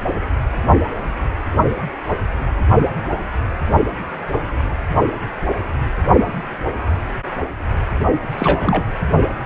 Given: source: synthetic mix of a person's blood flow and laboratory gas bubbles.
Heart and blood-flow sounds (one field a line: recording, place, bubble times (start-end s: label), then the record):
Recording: Doppler ultrasound of blood flow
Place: precordium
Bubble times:
8.38-8.83 s: bubbles
From the record:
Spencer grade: 1 (occasional bubble signal discernible with the cardiac motion signal, with majority of cardiac periods free of bubbles)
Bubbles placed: only in the low amplitude regions of the cardiac cycle